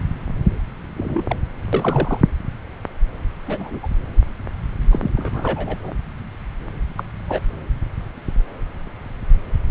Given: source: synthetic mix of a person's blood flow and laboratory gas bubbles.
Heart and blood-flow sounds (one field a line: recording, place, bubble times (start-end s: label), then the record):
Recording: Doppler ultrasound of blood flow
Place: subclavian vein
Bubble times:
0.97-1.36 s: bubbles
1.73-2.19 s: bubbles
3.47-3.79 s: bubbles
3.82-3.88 s: bubbles
4.91-5.11 s: bubbles
5.16-5.77 s: bubbles
5.83-5.92 s: bubbles
6.97-7.03 s: bubbles
7.29-7.39 s: bubbles
From the record:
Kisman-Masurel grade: 232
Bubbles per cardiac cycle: several, 3 to 8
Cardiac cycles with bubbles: 50 to 99%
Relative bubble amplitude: moderate (0.250 to 0.450)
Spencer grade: 3 (all of the cardiac periods contain showers or single bubble signals, but not dominating or overriding the cardiac motion signals)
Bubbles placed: anywhere in the cardiac cycle